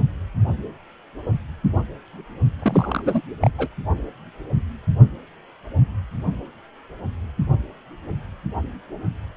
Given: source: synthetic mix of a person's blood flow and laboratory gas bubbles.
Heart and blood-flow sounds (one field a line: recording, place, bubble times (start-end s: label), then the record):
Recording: Doppler ultrasound of blood flow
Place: precordium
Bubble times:
2.59-3.21 s: bubbles
3.42-3.50 s: bubbles
3.58-3.68 s: bubbles
From the record:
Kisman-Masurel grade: 222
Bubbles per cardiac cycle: several, 3 to 8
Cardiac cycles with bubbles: 10 to 50%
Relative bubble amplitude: moderate (0.250 to 0.450)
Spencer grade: 2 (many but less than half of the cardiac periods contain bubble signals, singularly or in groups)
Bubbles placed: only in the low amplitude regions of the cardiac cycle